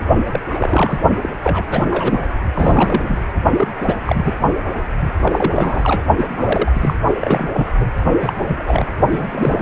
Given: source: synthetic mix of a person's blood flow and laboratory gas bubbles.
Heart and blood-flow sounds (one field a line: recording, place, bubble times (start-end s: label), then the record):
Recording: Doppler ultrasound of blood flow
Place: precordium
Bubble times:
0.32-0.40 s: bubbles
0.53-0.97 s: bubbles
1.21-1.29 s: bubbles
1.42-1.65 s: bubbles
1.71-1.85 s: bubbles
1.90-2.23 s: bubbles
2.54-3.23 s: bubbles
3.56-3.68 s: bubbles
3.80-3.95 s: bubbles
4.06-4.33 s: bubbles
4.76-5.13 s: bubbles
5.23-6.02 s: bubbles
6.17-6.71 s: bubbles
6.75-6.96 s: bubbles
7.21-7.49 s: bubbles
7.53-7.67 s: bubbles
7.80-7.85 s: bubbles
8.20-8.32 s: bubbles
8.47-8.93 s: bubbles
9.11-9.28 s: bubbles
9.31-9.62 s: bubbles
From the record:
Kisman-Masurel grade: 342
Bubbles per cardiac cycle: rolling drumbeat, 9 or more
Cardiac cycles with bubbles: 100%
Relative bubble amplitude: moderate (0.250 to 0.450)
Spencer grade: 3 (all of the cardiac periods contain showers or single bubble signals, but not dominating or overriding the cardiac motion signals)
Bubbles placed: only in the low amplitude regions of the cardiac cycle